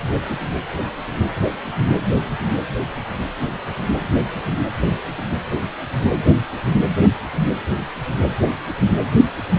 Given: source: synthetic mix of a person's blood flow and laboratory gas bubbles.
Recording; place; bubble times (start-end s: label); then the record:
Doppler ultrasound of blood flow; precordium
no bubbles
From the record:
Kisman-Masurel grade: 000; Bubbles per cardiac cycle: 0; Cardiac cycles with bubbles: 0%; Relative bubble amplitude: no bubbles discernible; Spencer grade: 0 (complete lack of bubble signals)